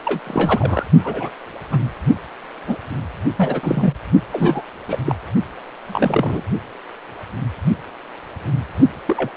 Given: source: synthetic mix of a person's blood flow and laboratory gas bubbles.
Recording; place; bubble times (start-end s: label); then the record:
Doppler ultrasound of blood flow; precordium
0.05-0.20 s: bubbles
0.27-0.84 s: bubbles
1.04-1.30 s: bubbles
1.71-1.78 s: bubbles
2.67-2.77 s: bubbles
3.37-3.94 s: bubbles
4.32-4.62 s: bubbles
4.88-4.98 s: bubbles
5.06-5.15 s: bubbles
5.87-6.44 s: bubbles
9.05-9.31 s: bubbles
From the record:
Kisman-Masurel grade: 232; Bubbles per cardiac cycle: several, 3 to 8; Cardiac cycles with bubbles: 50 to 99%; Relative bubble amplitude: moderate (0.250 to 0.450); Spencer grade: 3 (all of the cardiac periods contain showers or single bubble signals, but not dominating or overriding the cardiac motion signals); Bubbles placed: only in the low amplitude regions of the cardiac cycle